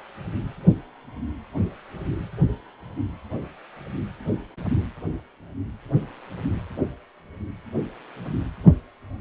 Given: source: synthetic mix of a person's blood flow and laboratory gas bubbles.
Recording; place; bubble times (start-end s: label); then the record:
Doppler ultrasound of blood flow; precordium
no bubbles
From the record:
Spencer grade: 0 (complete lack of bubble signals)